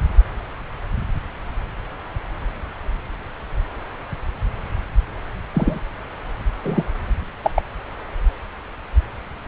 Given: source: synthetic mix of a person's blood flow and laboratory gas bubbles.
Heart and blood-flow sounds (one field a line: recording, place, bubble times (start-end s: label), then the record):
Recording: Doppler ultrasound of blood flow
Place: subclavian vein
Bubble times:
5.54-5.81 s: bubbles
6.63-6.83 s: bubbles
7.43-7.50 s: bubbles
7.55-7.62 s: bubbles
From the record:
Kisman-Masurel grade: 123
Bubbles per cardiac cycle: 1 to 2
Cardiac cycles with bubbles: 10 to 50%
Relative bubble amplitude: loud (0.450 to 0.775)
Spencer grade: 2 (many but less than half of the cardiac periods contain bubble signals, singularly or in groups)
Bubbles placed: anywhere in the cardiac cycle